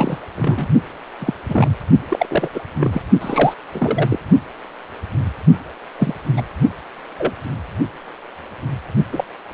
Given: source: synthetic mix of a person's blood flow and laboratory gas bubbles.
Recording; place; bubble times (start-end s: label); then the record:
Doppler ultrasound of blood flow; precordium
0.00-0.19 s: bubbles
0.35-0.67 s: bubbles
1.20-1.34 s: bubbles
1.49-1.68 s: bubbles
2.09-2.48 s: bubbles
2.54-2.61 s: bubbles
2.79-3.02 s: bubbles
3.21-3.54 s: bubbles
3.74-4.18 s: bubbles
5.98-6.13 s: bubbles
6.36-6.42 s: bubbles
7.18-7.33 s: bubbles
9.12-9.24 s: bubbles
From the record:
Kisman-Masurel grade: 232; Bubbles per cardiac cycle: several, 3 to 8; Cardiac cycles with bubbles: 50 to 99%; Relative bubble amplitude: moderate (0.250 to 0.450); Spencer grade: 3 (all of the cardiac periods contain showers or single bubble signals, but not dominating or overriding the cardiac motion signals); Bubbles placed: only in the low amplitude regions of the cardiac cycle